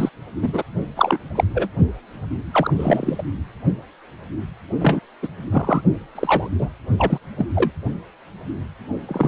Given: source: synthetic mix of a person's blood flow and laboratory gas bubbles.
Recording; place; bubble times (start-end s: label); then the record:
Doppler ultrasound of blood flow; precordium
0.00-0.09 s: bubbles
0.41-0.62 s: bubbles
0.96-1.18 s: bubbles
1.35-1.44 s: bubbles
1.54-1.69 s: bubbles
2.52-3.25 s: bubbles
4.80-5.00 s: bubbles
5.23-5.28 s: bubbles
5.52-5.81 s: bubbles
6.15-6.49 s: bubbles
6.58-6.69 s: bubbles
6.98-7.19 s: bubbles
7.38-7.46 s: bubbles
7.55-7.71 s: bubbles
9.08-9.27 s: bubbles
From the record:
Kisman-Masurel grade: 233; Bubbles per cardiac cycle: several, 3 to 8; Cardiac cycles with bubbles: 50 to 99%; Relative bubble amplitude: loud (0.450 to 0.775); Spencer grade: 3 (all of the cardiac periods contain showers or single bubble signals, but not dominating or overriding the cardiac motion signals); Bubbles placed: only in the low amplitude regions of the cardiac cycle